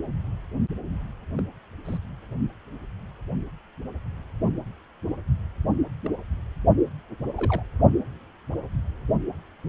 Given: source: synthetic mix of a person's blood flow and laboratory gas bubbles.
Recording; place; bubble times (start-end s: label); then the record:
Doppler ultrasound of blood flow; precordium
1.37-1.41 s: bubbles
1.85-1.97 s: bubbles
6.04-6.08 s: bubbles
7.37-7.62 s: bubbles
From the record:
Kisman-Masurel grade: 121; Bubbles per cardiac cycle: 1 to 2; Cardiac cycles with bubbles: 10 to 50%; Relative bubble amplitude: barely perceptible (0.100 to 0.250); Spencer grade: 2 (many but less than half of the cardiac periods contain bubble signals, singularly or in groups); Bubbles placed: only in the low amplitude regions of the cardiac cycle